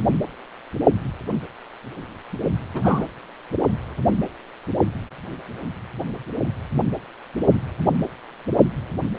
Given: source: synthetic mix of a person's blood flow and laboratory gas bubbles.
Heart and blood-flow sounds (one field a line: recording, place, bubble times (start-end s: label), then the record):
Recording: Doppler ultrasound of blood flow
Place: precordium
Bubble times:
2.74-3.04 s: bubbles
From the record:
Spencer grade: 1 (occasional bubble signal discernible with the cardiac motion signal, with majority of cardiac periods free of bubbles)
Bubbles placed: only in the low amplitude regions of the cardiac cycle